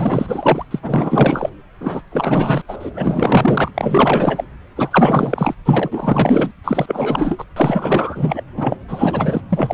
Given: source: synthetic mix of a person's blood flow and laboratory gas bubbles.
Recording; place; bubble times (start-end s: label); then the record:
Doppler ultrasound of blood flow; subclavian vein
0.00-0.65 s: bubbles
0.70-0.79 s: bubbles
0.82-1.49 s: bubbles
1.80-2.02 s: bubbles
2.10-2.62 s: bubbles
2.68-2.76 s: bubbles
2.79-2.91 s: bubbles
2.95-3.72 s: bubbles
3.74-4.44 s: bubbles
4.76-5.55 s: bubbles
5.65-6.51 s: bubbles
6.64-7.44 s: bubbles
7.56-8.44 s: bubbles
8.57-8.77 s: bubbles
8.88-9.41 s: bubbles
9.50-9.74 s: bubbles
From the record:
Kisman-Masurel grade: 444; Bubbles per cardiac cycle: continuous sound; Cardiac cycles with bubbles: 100%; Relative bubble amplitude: maximal (0.775 to 0.999); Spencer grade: 4 (maximum detectable bubble signal sounding continuously throughout systole and diastole of every cardiac period, and overriding the amplitude of the normal cardiac signals); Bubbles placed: anywhere in the cardiac cycle